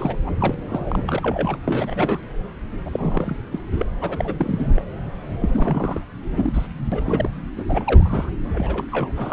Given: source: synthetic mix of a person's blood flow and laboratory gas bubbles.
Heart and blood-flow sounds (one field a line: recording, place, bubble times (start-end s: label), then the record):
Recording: Doppler ultrasound of blood flow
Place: subclavian vein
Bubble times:
0.00-0.16 s: bubbles
0.26-0.30 s: bubbles
0.39-0.54 s: bubbles
0.68-1.57 s: bubbles
1.68-2.19 s: bubbles
2.85-3.36 s: bubbles
3.52-3.60 s: bubbles
3.71-3.90 s: bubbles
4.01-4.35 s: bubbles
4.38-4.85 s: bubbles
5.41-6.01 s: bubbles
6.35-6.68 s: bubbles
6.91-7.31 s: bubbles
7.55-7.63 s: bubbles
7.69-8.30 s: bubbles
8.54-8.85 s: bubbles
8.92-9.11 s: bubbles
9.17-9.33 s: bubbles
From the record:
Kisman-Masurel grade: 342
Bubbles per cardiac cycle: rolling drumbeat, 9 or more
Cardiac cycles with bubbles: 100%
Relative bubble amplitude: moderate (0.250 to 0.450)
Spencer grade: 3 (all of the cardiac periods contain showers or single bubble signals, but not dominating or overriding the cardiac motion signals)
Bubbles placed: anywhere in the cardiac cycle